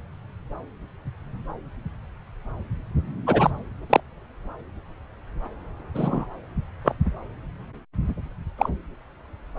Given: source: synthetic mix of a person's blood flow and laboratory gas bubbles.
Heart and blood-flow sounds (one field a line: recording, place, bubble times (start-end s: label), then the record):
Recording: Doppler ultrasound of blood flow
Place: subclavian vein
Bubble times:
3.27-3.51 s: bubbles
3.90-4.00 s: bubbles
5.94-6.27 s: bubbles
6.84-6.95 s: bubbles
8.57-8.70 s: bubbles
From the record:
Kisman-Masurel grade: 122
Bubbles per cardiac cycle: 1 to 2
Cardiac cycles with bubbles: 10 to 50%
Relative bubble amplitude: moderate (0.250 to 0.450)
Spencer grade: 2 (many but less than half of the cardiac periods contain bubble signals, singularly or in groups)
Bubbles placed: anywhere in the cardiac cycle